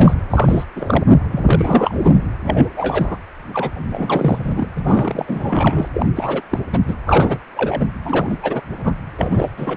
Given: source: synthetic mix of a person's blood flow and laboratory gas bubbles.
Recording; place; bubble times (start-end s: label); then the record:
Doppler ultrasound of blood flow; precordium
0.00-0.14 s: bubbles
0.30-0.66 s: bubbles
0.76-1.04 s: bubbles
1.06-1.17 s: bubbles
1.31-1.98 s: bubbles
2.03-2.17 s: bubbles
2.44-2.69 s: bubbles
2.77-3.17 s: bubbles
3.53-4.67 s: bubbles
4.75-5.88 s: bubbles
5.95-6.06 s: bubbles
6.16-6.42 s: bubbles
6.50-6.59 s: bubbles
6.72-6.79 s: bubbles
6.87-6.95 s: bubbles
7.06-7.38 s: bubbles
7.56-7.85 s: bubbles
8.04-8.38 s: bubbles
8.42-8.62 s: bubbles
8.73-8.95 s: bubbles
9.17-9.51 s: bubbles
9.56-9.77 s: bubbles
From the record:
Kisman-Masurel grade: 333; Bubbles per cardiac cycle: rolling drumbeat, 9 or more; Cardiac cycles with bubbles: 50 to 99%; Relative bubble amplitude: loud (0.450 to 0.775); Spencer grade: 3 (all of the cardiac periods contain showers or single bubble signals, but not dominating or overriding the cardiac motion signals); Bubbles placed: anywhere in the cardiac cycle